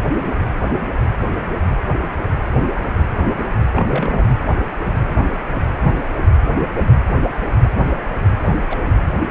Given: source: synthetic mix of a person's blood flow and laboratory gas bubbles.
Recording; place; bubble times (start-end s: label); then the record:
Doppler ultrasound of blood flow; precordium
3.73-4.27 s: bubbles
8.42-8.48 s: bubbles
8.70-8.75 s: bubbles
8.86-8.93 s: bubbles
From the record:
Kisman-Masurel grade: 222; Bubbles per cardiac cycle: several, 3 to 8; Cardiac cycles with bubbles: 10 to 50%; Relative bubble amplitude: moderate (0.250 to 0.450); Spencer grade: 2 (many but less than half of the cardiac periods contain bubble signals, singularly or in groups); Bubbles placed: anywhere in the cardiac cycle